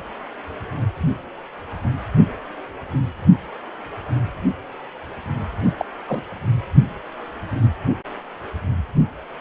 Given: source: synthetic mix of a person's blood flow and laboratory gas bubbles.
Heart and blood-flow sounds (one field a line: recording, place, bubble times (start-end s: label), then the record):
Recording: Doppler ultrasound of blood flow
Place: precordium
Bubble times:
5.78-5.85 s: bubbles
6.08-6.23 s: bubbles
From the record:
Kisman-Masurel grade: 112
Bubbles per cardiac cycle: 1 to 2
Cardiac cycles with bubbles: 1 to 10%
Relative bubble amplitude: moderate (0.250 to 0.450)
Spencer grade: 1 (occasional bubble signal discernible with the cardiac motion signal, with majority of cardiac periods free of bubbles)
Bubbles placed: only in the low amplitude regions of the cardiac cycle